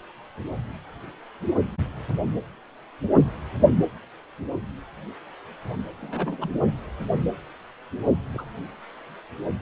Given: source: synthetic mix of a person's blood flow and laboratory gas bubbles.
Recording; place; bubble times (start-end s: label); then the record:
Doppler ultrasound of blood flow; precordium
6.01-6.50 s: bubbles
8.34-8.43 s: bubbles
From the record:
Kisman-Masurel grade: 111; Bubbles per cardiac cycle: 1 to 2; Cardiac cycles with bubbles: 1 to 10%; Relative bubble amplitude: barely perceptible (0.100 to 0.250); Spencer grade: 1 (occasional bubble signal discernible with the cardiac motion signal, with majority of cardiac periods free of bubbles); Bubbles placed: anywhere in the cardiac cycle